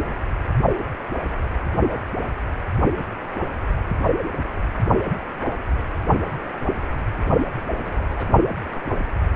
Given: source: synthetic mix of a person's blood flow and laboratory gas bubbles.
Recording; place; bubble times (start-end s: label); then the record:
Doppler ultrasound of blood flow; precordium
7.84-8.26 s: bubbles
From the record:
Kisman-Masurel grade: 121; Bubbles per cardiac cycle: 1 to 2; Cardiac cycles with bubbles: 10 to 50%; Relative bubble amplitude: barely perceptible (0.100 to 0.250); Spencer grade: 2 (many but less than half of the cardiac periods contain bubble signals, singularly or in groups); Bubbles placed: only in the low amplitude regions of the cardiac cycle